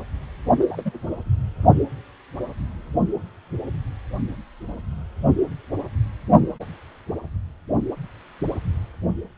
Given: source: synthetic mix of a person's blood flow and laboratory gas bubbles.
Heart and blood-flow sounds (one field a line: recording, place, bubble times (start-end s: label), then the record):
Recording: Doppler ultrasound of blood flow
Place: precordium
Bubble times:
0.59-0.91 s: bubbles
From the record:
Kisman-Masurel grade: 211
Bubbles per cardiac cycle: several, 3 to 8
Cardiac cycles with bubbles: 1 to 10%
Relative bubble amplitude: barely perceptible (0.100 to 0.250)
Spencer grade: 1 (occasional bubble signal discernible with the cardiac motion signal, with majority of cardiac periods free of bubbles)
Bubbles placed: only in the low amplitude regions of the cardiac cycle